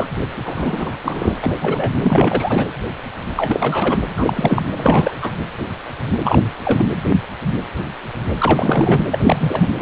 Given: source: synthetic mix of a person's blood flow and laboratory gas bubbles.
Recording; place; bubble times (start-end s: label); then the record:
Doppler ultrasound of blood flow; precordium
0.00-0.06 s: bubbles
0.45-0.91 s: bubbles
1.04-1.34 s: bubbles
1.42-1.55 s: bubbles
1.62-1.92 s: bubbles
2.01-2.65 s: bubbles
3.36-4.00 s: bubbles
4.17-4.62 s: bubbles
4.76-5.14 s: bubbles
5.21-5.37 s: bubbles
6.23-6.42 s: bubbles
6.65-6.86 s: bubbles
8.38-9.04 s: bubbles
9.11-9.68 s: bubbles
9.79-9.82 s: bubbles
From the record:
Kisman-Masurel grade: 333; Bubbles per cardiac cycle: rolling drumbeat, 9 or more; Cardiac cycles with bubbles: 50 to 99%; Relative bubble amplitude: loud (0.450 to 0.775); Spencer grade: 3 (all of the cardiac periods contain showers or single bubble signals, but not dominating or overriding the cardiac motion signals); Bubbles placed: anywhere in the cardiac cycle